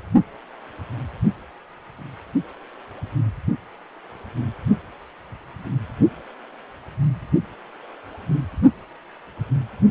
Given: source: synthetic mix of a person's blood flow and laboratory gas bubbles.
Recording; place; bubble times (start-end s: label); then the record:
Doppler ultrasound of blood flow; precordium
no bubbles
From the record:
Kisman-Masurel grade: 000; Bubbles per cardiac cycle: 0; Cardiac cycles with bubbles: 0%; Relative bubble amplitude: no bubbles discernible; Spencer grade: 0 (complete lack of bubble signals)